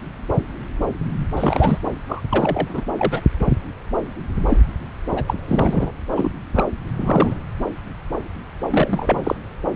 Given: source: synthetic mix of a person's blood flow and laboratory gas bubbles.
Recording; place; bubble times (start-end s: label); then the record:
Doppler ultrasound of blood flow; subclavian vein
1.36-1.79 s: bubbles
2.09-2.22 s: bubbles
2.30-2.85 s: bubbles
2.98-3.21 s: bubbles
4.49-4.57 s: bubbles
5.09-5.24 s: bubbles
5.27-5.34 s: bubbles
5.48-5.92 s: bubbles
6.15-6.33 s: bubbles
6.54-6.65 s: bubbles
6.98-7.35 s: bubbles
8.70-9.36 s: bubbles
From the record:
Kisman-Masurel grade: 232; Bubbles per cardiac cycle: several, 3 to 8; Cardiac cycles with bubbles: 50 to 99%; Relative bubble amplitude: moderate (0.250 to 0.450); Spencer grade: 3 (all of the cardiac periods contain showers or single bubble signals, but not dominating or overriding the cardiac motion signals); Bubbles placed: anywhere in the cardiac cycle